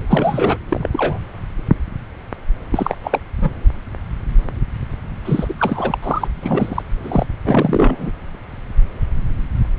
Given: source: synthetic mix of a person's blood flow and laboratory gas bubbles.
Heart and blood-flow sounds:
Doppler ultrasound of blood flow; subclavian vein
0.08-0.56 s: bubbles
0.68-0.89 s: bubbles
0.92-1.19 s: bubbles
2.71-2.98 s: bubbles
3.03-3.21 s: bubbles
3.41-3.51 s: bubbles
5.25-5.54 s: bubbles
5.58-5.98 s: bubbles
6.03-6.28 s: bubbles
6.41-6.83 s: bubbles
7.03-7.25 s: bubbles
7.46-8.10 s: bubbles
9.76-9.79 s: bubbles
From the record:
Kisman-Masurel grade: 332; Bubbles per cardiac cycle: rolling drumbeat, 9 or more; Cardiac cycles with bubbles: 50 to 99%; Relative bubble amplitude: moderate (0.250 to 0.450); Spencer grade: 3 (all of the cardiac periods contain showers or single bubble signals, but not dominating or overriding the cardiac motion signals); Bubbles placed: anywhere in the cardiac cycle

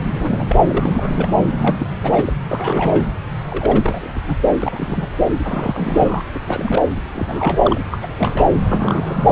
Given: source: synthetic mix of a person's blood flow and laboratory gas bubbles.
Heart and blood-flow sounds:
Doppler ultrasound of blood flow; subclavian vein
0.01-0.56 s: bubbles
0.65-1.28 s: bubbles
1.58-1.77 s: bubbles
1.79-1.86 s: bubbles
2.03-2.33 s: bubbles
2.49-3.04 s: bubbles
3.48-4.39 s: bubbles
4.62-5.09 s: bubbles
5.43-6.21 s: bubbles
6.34-6.39 s: bubbles
6.44-6.82 s: bubbles
7.13-7.81 s: bubbles
7.92-8.45 s: bubbles
8.69-9.32 s: bubbles
From the record:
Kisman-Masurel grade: 332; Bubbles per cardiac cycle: rolling drumbeat, 9 or more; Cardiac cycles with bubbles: 50 to 99%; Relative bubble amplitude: moderate (0.250 to 0.450); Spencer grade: 3 (all of the cardiac periods contain showers or single bubble signals, but not dominating or overriding the cardiac motion signals); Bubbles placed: anywhere in the cardiac cycle

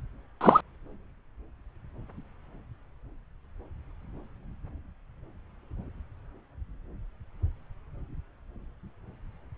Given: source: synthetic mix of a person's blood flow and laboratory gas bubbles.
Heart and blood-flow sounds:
Doppler ultrasound of blood flow; subclavian vein
0.41-0.60 s: bubbles
From the record:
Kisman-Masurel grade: 113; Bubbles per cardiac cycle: 1 to 2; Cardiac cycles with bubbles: 1 to 10%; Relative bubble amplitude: loud (0.450 to 0.775); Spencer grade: 1 (occasional bubble signal discernible with the cardiac motion signal, with majority of cardiac periods free of bubbles); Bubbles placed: anywhere in the cardiac cycle

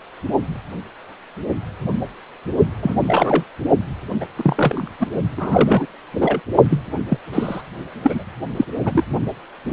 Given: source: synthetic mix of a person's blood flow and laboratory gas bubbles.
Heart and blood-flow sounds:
Doppler ultrasound of blood flow; precordium
2.82-2.94 s: bubbles
3.07-3.44 s: bubbles
4.20-4.27 s: bubbles
4.37-4.88 s: bubbles
4.99-5.07 s: bubbles
5.37-5.86 s: bubbles
6.17-6.40 s: bubbles
6.69-6.79 s: bubbles
7.09-7.18 s: bubbles
7.33-7.61 s: bubbles
8.03-8.23 s: bubbles
8.57-8.65 s: bubbles
8.85-9.04 s: bubbles
From the record:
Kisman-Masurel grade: 223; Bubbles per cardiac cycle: several, 3 to 8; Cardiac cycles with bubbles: 10 to 50%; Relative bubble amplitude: loud (0.450 to 0.775); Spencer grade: 2 (many but less than half of the cardiac periods contain bubble signals, singularly or in groups); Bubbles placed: only in the low amplitude regions of the cardiac cycle

